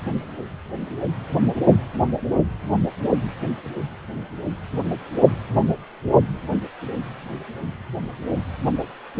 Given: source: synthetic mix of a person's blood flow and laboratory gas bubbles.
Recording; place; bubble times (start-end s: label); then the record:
Doppler ultrasound of blood flow; precordium
no bubbles
From the record:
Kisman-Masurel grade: 000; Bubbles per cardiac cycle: 0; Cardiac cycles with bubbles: 0%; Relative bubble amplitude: no bubbles discernible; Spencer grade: 0 (complete lack of bubble signals)